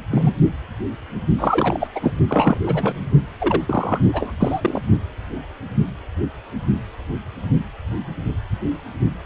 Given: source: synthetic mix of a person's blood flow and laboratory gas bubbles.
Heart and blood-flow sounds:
Doppler ultrasound of blood flow; precordium
0.10-0.35 s: bubbles
1.39-1.88 s: bubbles
1.94-2.12 s: bubbles
2.27-2.58 s: bubbles
2.66-3.08 s: bubbles
3.39-3.62 s: bubbles
3.67-3.99 s: bubbles
4.13-4.34 s: bubbles
4.40-4.82 s: bubbles
From the record:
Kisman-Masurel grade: 233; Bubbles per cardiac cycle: several, 3 to 8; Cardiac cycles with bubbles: 50 to 99%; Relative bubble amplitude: loud (0.450 to 0.775); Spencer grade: 3 (all of the cardiac periods contain showers or single bubble signals, but not dominating or overriding the cardiac motion signals); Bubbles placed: only in the low amplitude regions of the cardiac cycle

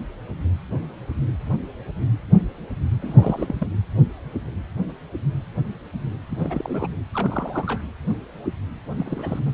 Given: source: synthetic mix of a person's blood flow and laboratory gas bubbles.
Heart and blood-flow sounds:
Doppler ultrasound of blood flow; precordium
3.02-3.68 s: bubbles
6.29-6.88 s: bubbles
7.13-7.81 s: bubbles
8.96-9.39 s: bubbles
9.45-9.51 s: bubbles
From the record:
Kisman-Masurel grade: 221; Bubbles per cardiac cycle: several, 3 to 8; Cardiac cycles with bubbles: 10 to 50%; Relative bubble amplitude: barely perceptible (0.100 to 0.250); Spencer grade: 2 (many but less than half of the cardiac periods contain bubble signals, singularly or in groups); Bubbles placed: anywhere in the cardiac cycle

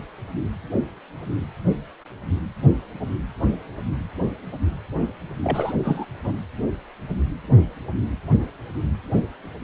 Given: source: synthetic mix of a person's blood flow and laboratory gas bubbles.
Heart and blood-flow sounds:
Doppler ultrasound of blood flow; precordium
5.43-5.74 s: bubbles
5.83-6.05 s: bubbles
6.24-6.34 s: bubbles
From the record:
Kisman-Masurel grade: 212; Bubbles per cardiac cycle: several, 3 to 8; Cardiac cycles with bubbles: 1 to 10%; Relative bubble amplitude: moderate (0.250 to 0.450); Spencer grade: 1 (occasional bubble signal discernible with the cardiac motion signal, with majority of cardiac periods free of bubbles); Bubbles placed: anywhere in the cardiac cycle

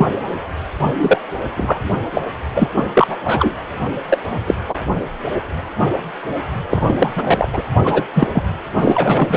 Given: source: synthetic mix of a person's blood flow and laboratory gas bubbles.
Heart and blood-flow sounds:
Doppler ultrasound of blood flow; precordium
0.00-0.15 s: bubbles
0.82-0.91 s: bubbles
0.98-1.20 s: bubbles
1.55-1.83 s: bubbles
2.14-2.22 s: bubbles
2.55-2.68 s: bubbles
2.75-2.84 s: bubbles
2.94-3.16 s: bubbles
3.24-3.54 s: bubbles
4.10-4.19 s: bubbles
4.46-4.54 s: bubbles
4.69-4.75 s: bubbles
6.70-7.12 s: bubbles
7.15-7.48 s: bubbles
7.53-7.63 s: bubbles
7.83-8.04 s: bubbles
8.14-8.28 s: bubbles
8.33-8.43 s: bubbles
8.80-9.37 s: bubbles
From the record:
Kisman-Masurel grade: 233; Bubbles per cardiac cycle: several, 3 to 8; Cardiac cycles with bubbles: 50 to 99%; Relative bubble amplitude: loud (0.450 to 0.775); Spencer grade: 3 (all of the cardiac periods contain showers or single bubble signals, but not dominating or overriding the cardiac motion signals); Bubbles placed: anywhere in the cardiac cycle

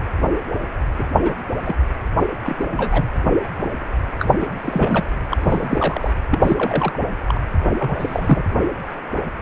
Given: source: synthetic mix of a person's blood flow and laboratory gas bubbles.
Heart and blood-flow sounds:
Doppler ultrasound of blood flow; precordium
0.98-1.04 s: bubbles
1.20-1.32 s: bubbles
1.65-1.75 s: bubbles
2.44-3.05 s: bubbles
4.19-4.26 s: bubbles
4.40-4.49 s: bubbles
4.62-5.07 s: bubbles
5.31-5.37 s: bubbles
5.43-6.12 s: bubbles
6.31-6.98 s: bubbles
7.27-7.46 s: bubbles
7.79-8.44 s: bubbles
From the record:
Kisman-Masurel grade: 222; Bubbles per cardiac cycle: several, 3 to 8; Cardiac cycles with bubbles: 10 to 50%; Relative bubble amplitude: moderate (0.250 to 0.450); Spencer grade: 2 (many but less than half of the cardiac periods contain bubble signals, singularly or in groups); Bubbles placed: anywhere in the cardiac cycle

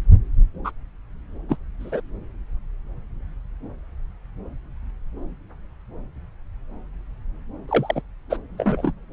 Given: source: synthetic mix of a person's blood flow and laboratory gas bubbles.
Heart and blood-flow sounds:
Doppler ultrasound of blood flow; subclavian vein
0.64-0.71 s: bubbles
1.49-1.56 s: bubbles
1.80-2.01 s: bubbles
7.68-8.02 s: bubbles
8.29-8.38 s: bubbles
8.57-8.92 s: bubbles
From the record:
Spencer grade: 2 (many but less than half of the cardiac periods contain bubble signals, singularly or in groups); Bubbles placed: anywhere in the cardiac cycle

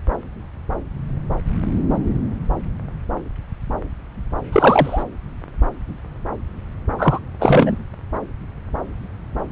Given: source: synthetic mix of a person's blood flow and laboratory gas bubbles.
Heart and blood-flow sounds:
Doppler ultrasound of blood flow; subclavian vein
4.52-5.03 s: bubbles
6.98-7.20 s: bubbles
7.39-7.77 s: bubbles
From the record:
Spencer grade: 2 (many but less than half of the cardiac periods contain bubble signals, singularly or in groups); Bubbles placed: anywhere in the cardiac cycle

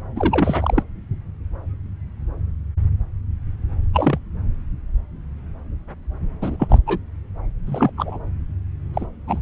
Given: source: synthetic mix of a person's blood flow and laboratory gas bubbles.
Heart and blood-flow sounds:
Doppler ultrasound of blood flow; subclavian vein
0.15-0.83 s: bubbles
3.94-4.19 s: bubbles
6.41-6.78 s: bubbles
6.87-6.99 s: bubbles
7.66-7.91 s: bubbles
7.98-8.19 s: bubbles
8.93-9.06 s: bubbles
9.27-9.40 s: bubbles
From the record:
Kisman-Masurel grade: 222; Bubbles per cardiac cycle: several, 3 to 8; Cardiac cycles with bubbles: 10 to 50%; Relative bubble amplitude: moderate (0.250 to 0.450); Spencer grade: 2 (many but less than half of the cardiac periods contain bubble signals, singularly or in groups); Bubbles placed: anywhere in the cardiac cycle

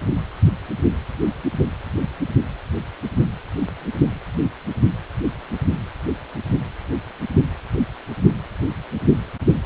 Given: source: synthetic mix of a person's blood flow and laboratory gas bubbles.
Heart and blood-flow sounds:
Doppler ultrasound of blood flow; precordium
no bubbles
From the record:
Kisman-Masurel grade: 000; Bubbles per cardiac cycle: 0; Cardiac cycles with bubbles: 0%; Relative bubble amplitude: no bubbles discernible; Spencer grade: 0 (complete lack of bubble signals)

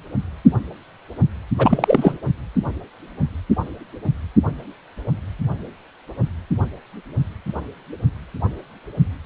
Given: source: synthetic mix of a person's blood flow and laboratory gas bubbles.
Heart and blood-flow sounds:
Doppler ultrasound of blood flow; precordium
1.58-2.18 s: bubbles
From the record:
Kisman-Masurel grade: 213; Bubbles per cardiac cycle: several, 3 to 8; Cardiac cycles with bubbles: 1 to 10%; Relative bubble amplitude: loud (0.450 to 0.775); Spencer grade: 1 (occasional bubble signal discernible with the cardiac motion signal, with majority of cardiac periods free of bubbles); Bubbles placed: only in the low amplitude regions of the cardiac cycle

